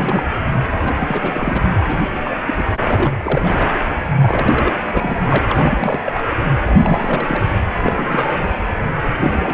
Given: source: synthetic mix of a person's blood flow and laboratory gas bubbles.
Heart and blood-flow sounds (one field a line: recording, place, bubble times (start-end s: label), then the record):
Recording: Doppler ultrasound of blood flow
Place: precordium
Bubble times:
0.00-0.29 s: bubbles
0.78-0.95 s: bubbles
0.99-1.60 s: bubbles
1.79-2.05 s: bubbles
2.24-2.38 s: bubbles
2.45-2.78 s: bubbles
2.85-3.69 s: bubbles
4.18-4.73 s: bubbles
4.92-5.38 s: bubbles
5.48-6.01 s: bubbles
6.05-6.30 s: bubbles
6.66-7.51 s: bubbles
7.81-8.44 s: bubbles
9.03-9.08 s: bubbles
9.21-9.54 s: bubbles
From the record:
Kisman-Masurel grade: 342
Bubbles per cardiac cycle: rolling drumbeat, 9 or more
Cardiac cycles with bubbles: 100%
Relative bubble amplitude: moderate (0.250 to 0.450)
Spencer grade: 3 (all of the cardiac periods contain showers or single bubble signals, but not dominating or overriding the cardiac motion signals)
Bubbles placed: anywhere in the cardiac cycle